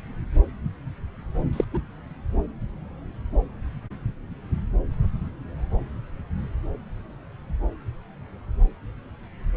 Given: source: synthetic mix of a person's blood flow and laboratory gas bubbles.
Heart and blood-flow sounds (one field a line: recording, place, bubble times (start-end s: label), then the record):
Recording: Doppler ultrasound of blood flow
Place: subclavian vein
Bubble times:
1.53-1.65 s: bubbles
1.73-1.79 s: bubbles
From the record:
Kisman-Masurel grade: 112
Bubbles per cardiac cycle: 1 to 2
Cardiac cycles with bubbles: 1 to 10%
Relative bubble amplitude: moderate (0.250 to 0.450)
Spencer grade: 1 (occasional bubble signal discernible with the cardiac motion signal, with majority of cardiac periods free of bubbles)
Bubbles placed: anywhere in the cardiac cycle